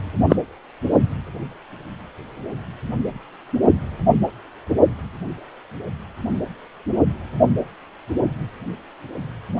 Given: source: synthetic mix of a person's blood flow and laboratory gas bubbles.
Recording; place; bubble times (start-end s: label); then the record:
Doppler ultrasound of blood flow; precordium
0.29-0.36 s: bubbles
From the record:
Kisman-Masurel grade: 113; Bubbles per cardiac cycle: 1 to 2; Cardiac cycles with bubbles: 1 to 10%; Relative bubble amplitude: loud (0.450 to 0.775); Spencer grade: 1 (occasional bubble signal discernible with the cardiac motion signal, with majority of cardiac periods free of bubbles); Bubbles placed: only in the low amplitude regions of the cardiac cycle